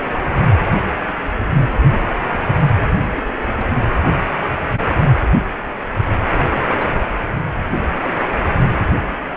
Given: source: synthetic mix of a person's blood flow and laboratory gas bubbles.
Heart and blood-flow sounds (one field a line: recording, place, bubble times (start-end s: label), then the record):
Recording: Doppler ultrasound of blood flow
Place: precordium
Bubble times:
1.90-2.25 s: bubbles
2.28-2.40 s: bubbles
2.49-2.53 s: bubbles
2.57-2.65 s: bubbles
2.91-2.99 s: bubbles
3.14-3.22 s: bubbles
3.58-3.65 s: bubbles
4.21-4.26 s: bubbles
4.57-4.71 s: bubbles
4.89-4.96 s: bubbles
6.53-7.04 s: bubbles
From the record:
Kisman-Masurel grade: 221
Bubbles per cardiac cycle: several, 3 to 8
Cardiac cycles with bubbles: 10 to 50%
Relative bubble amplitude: barely perceptible (0.100 to 0.250)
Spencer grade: 2 (many but less than half of the cardiac periods contain bubble signals, singularly or in groups)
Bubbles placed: anywhere in the cardiac cycle